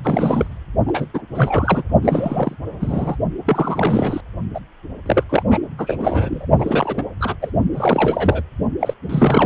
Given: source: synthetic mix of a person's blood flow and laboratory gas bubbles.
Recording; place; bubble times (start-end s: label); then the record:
Doppler ultrasound of blood flow; precordium
0.04-0.57 s: bubbles
0.86-1.07 s: bubbles
1.14-1.22 s: bubbles
1.31-1.83 s: bubbles
2.02-2.55 s: bubbles
2.66-3.16 s: bubbles
3.45-4.21 s: bubbles
4.54-4.59 s: bubbles
5.06-5.24 s: bubbles
5.29-5.43 s: bubbles
5.50-5.58 s: bubbles
5.78-6.46 s: bubbles
6.59-7.03 s: bubbles
7.20-7.35 s: bubbles
7.42-7.51 s: bubbles
7.73-8.43 s: bubbles
8.80-8.94 s: bubbles
9.09-9.46 s: bubbles
From the record:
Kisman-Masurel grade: 342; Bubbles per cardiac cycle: rolling drumbeat, 9 or more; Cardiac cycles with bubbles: 100%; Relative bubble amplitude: moderate (0.250 to 0.450); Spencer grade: 3 (all of the cardiac periods contain showers or single bubble signals, but not dominating or overriding the cardiac motion signals); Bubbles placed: only in the low amplitude regions of the cardiac cycle